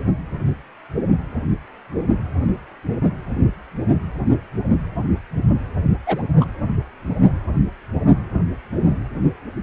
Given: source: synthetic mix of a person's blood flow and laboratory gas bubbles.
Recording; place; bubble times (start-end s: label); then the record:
Doppler ultrasound of blood flow; precordium
6.06-6.22 s: bubbles
6.40-6.46 s: bubbles
From the record:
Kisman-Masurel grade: 113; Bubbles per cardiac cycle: 1 to 2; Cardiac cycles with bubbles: 1 to 10%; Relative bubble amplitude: loud (0.450 to 0.775); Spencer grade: 1 (occasional bubble signal discernible with the cardiac motion signal, with majority of cardiac periods free of bubbles); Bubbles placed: anywhere in the cardiac cycle